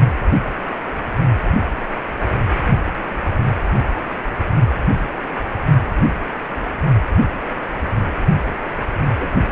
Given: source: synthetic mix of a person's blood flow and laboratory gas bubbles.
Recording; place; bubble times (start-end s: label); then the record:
Doppler ultrasound of blood flow; precordium
9.06-9.43 s: bubbles
From the record:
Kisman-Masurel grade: 121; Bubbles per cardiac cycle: 1 to 2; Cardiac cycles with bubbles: 10 to 50%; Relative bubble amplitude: barely perceptible (0.100 to 0.250); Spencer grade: 2 (many but less than half of the cardiac periods contain bubble signals, singularly or in groups); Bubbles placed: only in the low amplitude regions of the cardiac cycle